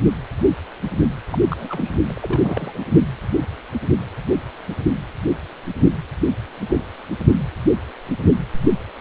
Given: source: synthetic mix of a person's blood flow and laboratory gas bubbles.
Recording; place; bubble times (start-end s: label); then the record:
Doppler ultrasound of blood flow; precordium
1.29-1.96 s: bubbles
2.09-2.78 s: bubbles
From the record:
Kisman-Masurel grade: 221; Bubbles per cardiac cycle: several, 3 to 8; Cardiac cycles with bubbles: 10 to 50%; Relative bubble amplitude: barely perceptible (0.100 to 0.250); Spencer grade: 2 (many but less than half of the cardiac periods contain bubble signals, singularly or in groups); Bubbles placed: only in the low amplitude regions of the cardiac cycle